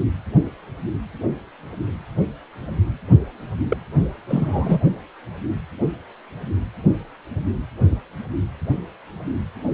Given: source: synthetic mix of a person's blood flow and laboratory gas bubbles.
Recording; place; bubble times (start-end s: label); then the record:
Doppler ultrasound of blood flow; precordium
3.69-3.77 s: bubbles
4.28-4.80 s: bubbles
From the record:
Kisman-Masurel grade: 212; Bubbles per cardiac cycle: several, 3 to 8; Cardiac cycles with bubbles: 1 to 10%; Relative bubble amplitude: moderate (0.250 to 0.450); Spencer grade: 1 (occasional bubble signal discernible with the cardiac motion signal, with majority of cardiac periods free of bubbles); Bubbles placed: only in the low amplitude regions of the cardiac cycle